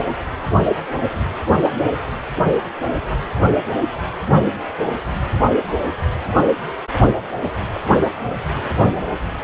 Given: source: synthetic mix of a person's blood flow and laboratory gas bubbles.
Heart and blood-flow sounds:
Doppler ultrasound of blood flow; precordium
1.55-1.61 s: bubbles
1.64-1.72 s: bubbles
7.75-7.79 s: bubbles
8.54-8.73 s: bubbles
From the record:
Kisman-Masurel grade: 121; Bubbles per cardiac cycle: 1 to 2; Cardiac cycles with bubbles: 10 to 50%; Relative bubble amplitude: barely perceptible (0.100 to 0.250); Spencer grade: 2 (many but less than half of the cardiac periods contain bubble signals, singularly or in groups); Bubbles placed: anywhere in the cardiac cycle

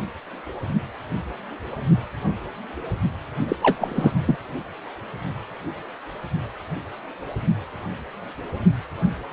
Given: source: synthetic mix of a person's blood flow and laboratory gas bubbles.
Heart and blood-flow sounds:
Doppler ultrasound of blood flow; precordium
3.48-3.56 s: bubbles
3.62-4.19 s: bubbles
4.25-4.38 s: bubbles
From the record:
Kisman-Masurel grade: 212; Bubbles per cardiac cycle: several, 3 to 8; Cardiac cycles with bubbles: 1 to 10%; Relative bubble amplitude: moderate (0.250 to 0.450); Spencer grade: 1 (occasional bubble signal discernible with the cardiac motion signal, with majority of cardiac periods free of bubbles); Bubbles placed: only in the low amplitude regions of the cardiac cycle

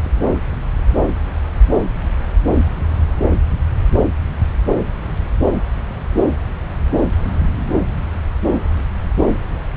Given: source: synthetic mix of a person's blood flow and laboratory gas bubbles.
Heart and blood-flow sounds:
Doppler ultrasound of blood flow; subclavian vein
0.04-0.11 s: bubbles
0.14-0.20 s: bubbles
From the record:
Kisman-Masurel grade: 211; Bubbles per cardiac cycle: several, 3 to 8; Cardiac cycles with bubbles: 1 to 10%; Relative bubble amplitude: barely perceptible (0.100 to 0.250); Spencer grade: 1 (occasional bubble signal discernible with the cardiac motion signal, with majority of cardiac periods free of bubbles); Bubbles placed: anywhere in the cardiac cycle

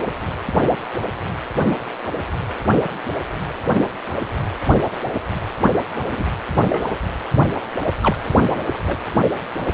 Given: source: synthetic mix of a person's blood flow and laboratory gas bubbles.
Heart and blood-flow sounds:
Doppler ultrasound of blood flow; precordium
6.11-6.24 s: bubbles
6.70-6.88 s: bubbles
8.01-8.16 s: bubbles
8.31-8.54 s: bubbles
8.86-8.97 s: bubbles
From the record:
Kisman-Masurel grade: 123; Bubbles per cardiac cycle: 1 to 2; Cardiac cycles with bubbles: 10 to 50%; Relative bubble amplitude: loud (0.450 to 0.775); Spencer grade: 2 (many but less than half of the cardiac periods contain bubble signals, singularly or in groups); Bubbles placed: anywhere in the cardiac cycle

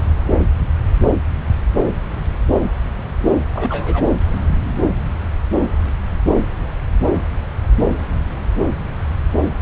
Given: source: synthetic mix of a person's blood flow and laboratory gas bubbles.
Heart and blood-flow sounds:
Doppler ultrasound of blood flow; subclavian vein
3.54-4.05 s: bubbles
From the record:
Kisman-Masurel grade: 112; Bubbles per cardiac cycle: 1 to 2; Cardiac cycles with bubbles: 1 to 10%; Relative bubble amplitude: moderate (0.250 to 0.450); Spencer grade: 1 (occasional bubble signal discernible with the cardiac motion signal, with majority of cardiac periods free of bubbles); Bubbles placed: anywhere in the cardiac cycle

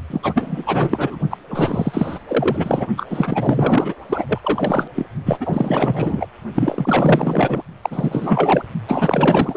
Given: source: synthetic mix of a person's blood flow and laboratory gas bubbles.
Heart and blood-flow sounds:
Doppler ultrasound of blood flow; precordium
0.10-1.20 s: bubbles
1.30-1.38 s: bubbles
1.50-2.19 s: bubbles
2.27-2.87 s: bubbles
2.97-3.06 s: bubbles
3.10-3.95 s: bubbles
4.09-4.38 s: bubbles
4.43-4.88 s: bubbles
4.95-5.06 s: bubbles
5.25-5.38 s: bubbles
5.40-6.28 s: bubbles
6.54-7.62 s: bubbles
7.82-8.62 s: bubbles
8.88-9.57 s: bubbles
From the record:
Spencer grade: 4 (maximum detectable bubble signal sounding continuously throughout systole and diastole of every cardiac period, and overriding the amplitude of the normal cardiac signals); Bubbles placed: only in the low amplitude regions of the cardiac cycle

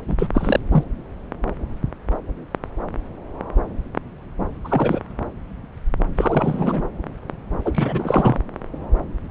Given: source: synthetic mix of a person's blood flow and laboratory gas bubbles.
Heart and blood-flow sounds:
Doppler ultrasound of blood flow; subclavian vein
0.08-0.16 s: bubbles
0.19-0.28 s: bubbles
0.34-0.59 s: bubbles
0.71-0.83 s: bubbles
4.64-5.00 s: bubbles
6.15-6.82 s: bubbles
7.65-8.38 s: bubbles
From the record:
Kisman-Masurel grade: 222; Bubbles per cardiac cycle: several, 3 to 8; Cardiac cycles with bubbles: 10 to 50%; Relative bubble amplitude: moderate (0.250 to 0.450); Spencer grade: 2 (many but less than half of the cardiac periods contain bubble signals, singularly or in groups); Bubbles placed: anywhere in the cardiac cycle

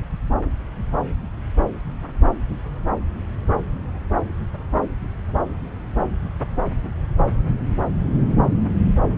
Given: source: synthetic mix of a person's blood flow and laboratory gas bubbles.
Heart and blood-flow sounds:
Doppler ultrasound of blood flow; subclavian vein
no bubbles
From the record:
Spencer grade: 0 (complete lack of bubble signals)

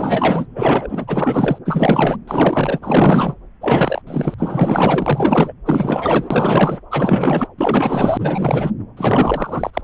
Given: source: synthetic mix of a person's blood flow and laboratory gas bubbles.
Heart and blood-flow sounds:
Doppler ultrasound of blood flow; subclavian vein
0.00-0.47 s: bubbles
0.55-1.58 s: bubbles
1.65-2.17 s: bubbles
2.27-3.34 s: bubbles
3.61-4.01 s: bubbles
4.07-4.34 s: bubbles
4.38-5.53 s: bubbles
5.66-6.79 s: bubbles
6.90-7.48 s: bubbles
7.58-8.71 s: bubbles
8.96-9.71 s: bubbles
9.73-9.81 s: bubbles
From the record:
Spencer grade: 4 (maximum detectable bubble signal sounding continuously throughout systole and diastole of every cardiac period, and overriding the amplitude of the normal cardiac signals); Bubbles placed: anywhere in the cardiac cycle

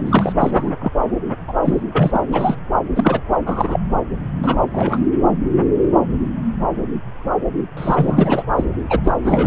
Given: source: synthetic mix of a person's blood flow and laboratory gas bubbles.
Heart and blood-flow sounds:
Doppler ultrasound of blood flow; subclavian vein
0.00-0.02 s: bubbles
0.06-0.33 s: bubbles
0.40-0.71 s: bubbles
0.80-0.91 s: bubbles
1.48-1.53 s: bubbles
1.64-1.81 s: bubbles
1.92-2.20 s: bubbles
2.32-2.56 s: bubbles
2.95-3.21 s: bubbles
3.46-3.80 s: bubbles
4.44-4.57 s: bubbles
4.73-5.08 s: bubbles
7.77-8.42 s: bubbles
8.56-8.64 s: bubbles
8.89-9.00 s: bubbles
9.04-9.14 s: bubbles
9.23-9.47 s: bubbles
From the record:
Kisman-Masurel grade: 333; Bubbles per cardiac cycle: rolling drumbeat, 9 or more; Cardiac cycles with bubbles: 50 to 99%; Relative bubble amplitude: loud (0.450 to 0.775); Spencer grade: 3 (all of the cardiac periods contain showers or single bubble signals, but not dominating or overriding the cardiac motion signals); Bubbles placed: anywhere in the cardiac cycle

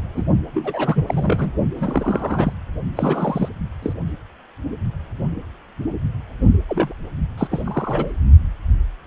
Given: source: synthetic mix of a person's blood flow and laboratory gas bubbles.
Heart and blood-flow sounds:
Doppler ultrasound of blood flow; precordium
0.14-0.26 s: bubbles
0.54-1.53 s: bubbles
1.76-2.52 s: bubbles
2.95-3.49 s: bubbles
3.82-3.94 s: bubbles
6.68-6.94 s: bubbles
7.38-7.48 s: bubbles
7.50-8.12 s: bubbles
From the record:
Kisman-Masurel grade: 332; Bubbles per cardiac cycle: rolling drumbeat, 9 or more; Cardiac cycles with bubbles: 50 to 99%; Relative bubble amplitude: moderate (0.250 to 0.450); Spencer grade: 3 (all of the cardiac periods contain showers or single bubble signals, but not dominating or overriding the cardiac motion signals); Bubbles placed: only in the low amplitude regions of the cardiac cycle

